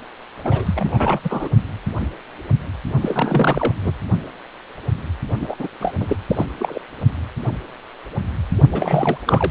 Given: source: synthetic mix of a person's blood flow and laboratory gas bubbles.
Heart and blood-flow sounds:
Doppler ultrasound of blood flow; precordium
0.44-1.19 s: bubbles
1.24-1.49 s: bubbles
3.00-3.74 s: bubbles
3.83-3.92 s: bubbles
5.40-5.55 s: bubbles
5.59-5.68 s: bubbles
5.80-5.93 s: bubbles
5.97-6.17 s: bubbles
6.29-6.46 s: bubbles
6.58-6.79 s: bubbles
8.70-9.17 s: bubbles
9.25-9.51 s: bubbles
From the record:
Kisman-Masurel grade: 332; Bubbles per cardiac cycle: rolling drumbeat, 9 or more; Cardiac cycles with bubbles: 50 to 99%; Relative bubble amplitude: moderate (0.250 to 0.450); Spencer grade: 3 (all of the cardiac periods contain showers or single bubble signals, but not dominating or overriding the cardiac motion signals); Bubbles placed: only in the low amplitude regions of the cardiac cycle

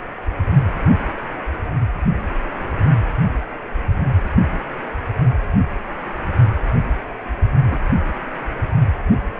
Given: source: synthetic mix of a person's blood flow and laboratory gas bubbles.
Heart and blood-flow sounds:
Doppler ultrasound of blood flow; precordium
7.67-7.78 s: bubbles
From the record:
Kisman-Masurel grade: 112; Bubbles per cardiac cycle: 1 to 2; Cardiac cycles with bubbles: 1 to 10%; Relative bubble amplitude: moderate (0.250 to 0.450); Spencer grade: 1 (occasional bubble signal discernible with the cardiac motion signal, with majority of cardiac periods free of bubbles); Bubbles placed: anywhere in the cardiac cycle

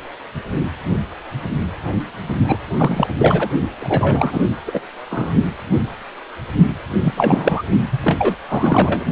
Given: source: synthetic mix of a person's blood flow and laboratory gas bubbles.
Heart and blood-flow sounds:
Doppler ultrasound of blood flow; precordium
2.47-2.60 s: bubbles
2.77-3.07 s: bubbles
3.17-3.49 s: bubbles
3.80-4.41 s: bubbles
4.67-4.81 s: bubbles
5.10-5.33 s: bubbles
7.02-7.63 s: bubbles
7.92-7.99 s: bubbles
8.04-8.36 s: bubbles
8.48-9.04 s: bubbles
From the record:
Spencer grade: 3 (all of the cardiac periods contain showers or single bubble signals, but not dominating or overriding the cardiac motion signals); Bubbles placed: only in the low amplitude regions of the cardiac cycle

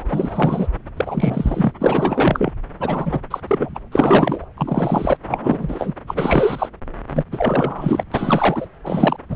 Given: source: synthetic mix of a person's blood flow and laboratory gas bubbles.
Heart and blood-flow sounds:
Doppler ultrasound of blood flow; subclavian vein
0.00-0.05 s: bubbles
0.08-0.68 s: bubbles
0.97-1.72 s: bubbles
1.81-2.52 s: bubbles
2.79-3.19 s: bubbles
3.30-3.40 s: bubbles
3.48-3.77 s: bubbles
3.92-4.45 s: bubbles
4.57-5.17 s: bubbles
5.27-5.94 s: bubbles
6.07-6.69 s: bubbles
7.10-7.23 s: bubbles
7.31-8.04 s: bubbles
8.12-8.67 s: bubbles
8.84-9.17 s: bubbles
9.29-9.36 s: bubbles
From the record:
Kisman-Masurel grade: 343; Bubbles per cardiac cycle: rolling drumbeat, 9 or more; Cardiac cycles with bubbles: 100%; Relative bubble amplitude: loud (0.450 to 0.775); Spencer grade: 3 (all of the cardiac periods contain showers or single bubble signals, but not dominating or overriding the cardiac motion signals); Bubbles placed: anywhere in the cardiac cycle

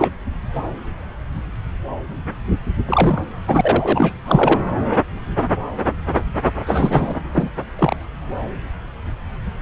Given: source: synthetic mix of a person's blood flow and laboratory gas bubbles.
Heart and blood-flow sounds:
Doppler ultrasound of blood flow; subclavian vein
0.00-0.12 s: bubbles
2.83-3.28 s: bubbles
3.47-4.13 s: bubbles
4.25-4.61 s: bubbles
6.67-7.15 s: bubbles
7.32-7.50 s: bubbles
7.79-7.96 s: bubbles
From the record:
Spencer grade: 2 (many but less than half of the cardiac periods contain bubble signals, singularly or in groups); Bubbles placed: anywhere in the cardiac cycle

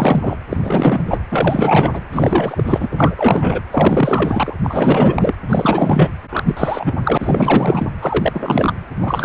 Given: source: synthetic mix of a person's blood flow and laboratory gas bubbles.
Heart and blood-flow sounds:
Doppler ultrasound of blood flow; precordium
0.00-0.38 s: bubbles
0.49-1.18 s: bubbles
1.30-2.01 s: bubbles
2.10-3.61 s: bubbles
3.71-4.54 s: bubbles
4.63-5.34 s: bubbles
5.48-6.12 s: bubbles
6.29-6.93 s: bubbles
7.03-7.17 s: bubbles
7.20-7.90 s: bubbles
8.01-8.73 s: bubbles
8.91-9.25 s: bubbles
From the record:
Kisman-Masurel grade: 444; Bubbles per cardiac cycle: continuous sound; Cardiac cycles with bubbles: 100%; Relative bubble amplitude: maximal (0.775 to 0.999); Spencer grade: 4 (maximum detectable bubble signal sounding continuously throughout systole and diastole of every cardiac period, and overriding the amplitude of the normal cardiac signals); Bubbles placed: anywhere in the cardiac cycle

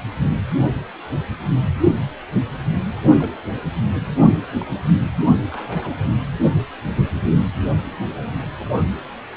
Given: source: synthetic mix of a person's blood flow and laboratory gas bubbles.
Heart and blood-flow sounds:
Doppler ultrasound of blood flow; precordium
3.19-3.37 s: bubbles
4.61-4.65 s: bubbles
5.51-5.95 s: bubbles
From the record:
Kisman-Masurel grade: 121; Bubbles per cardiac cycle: 1 to 2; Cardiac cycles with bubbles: 10 to 50%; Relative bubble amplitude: barely perceptible (0.100 to 0.250); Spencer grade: 2 (many but less than half of the cardiac periods contain bubble signals, singularly or in groups); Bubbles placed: only in the low amplitude regions of the cardiac cycle

